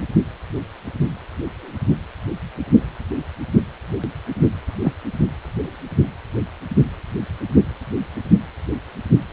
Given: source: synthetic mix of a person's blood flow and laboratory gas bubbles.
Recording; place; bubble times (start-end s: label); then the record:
Doppler ultrasound of blood flow; precordium
4.83-4.92 s: bubbles
From the record:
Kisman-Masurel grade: 113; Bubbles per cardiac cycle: 1 to 2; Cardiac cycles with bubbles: 1 to 10%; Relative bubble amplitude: loud (0.450 to 0.775); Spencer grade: 1 (occasional bubble signal discernible with the cardiac motion signal, with majority of cardiac periods free of bubbles); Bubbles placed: anywhere in the cardiac cycle